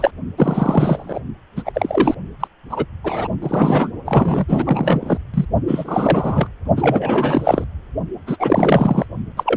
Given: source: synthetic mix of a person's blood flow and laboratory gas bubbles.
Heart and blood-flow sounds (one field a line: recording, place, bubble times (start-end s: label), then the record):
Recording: Doppler ultrasound of blood flow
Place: precordium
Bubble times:
0.00-0.11 s: bubbles
0.37-1.19 s: bubbles
1.56-1.63 s: bubbles
1.65-2.15 s: bubbles
2.40-2.47 s: bubbles
2.70-2.85 s: bubbles
3.04-3.27 s: bubbles
3.42-3.91 s: bubbles
4.05-4.45 s: bubbles
4.48-5.17 s: bubbles
5.33-5.45 s: bubbles
5.67-6.48 s: bubbles
6.76-7.64 s: bubbles
8.27-8.37 s: bubbles
8.39-9.06 s: bubbles
9.37-9.57 s: bubbles
From the record:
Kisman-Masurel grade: 343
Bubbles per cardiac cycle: rolling drumbeat, 9 or more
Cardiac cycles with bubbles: 100%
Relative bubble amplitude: loud (0.450 to 0.775)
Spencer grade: 3 (all of the cardiac periods contain showers or single bubble signals, but not dominating or overriding the cardiac motion signals)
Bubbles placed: only in the low amplitude regions of the cardiac cycle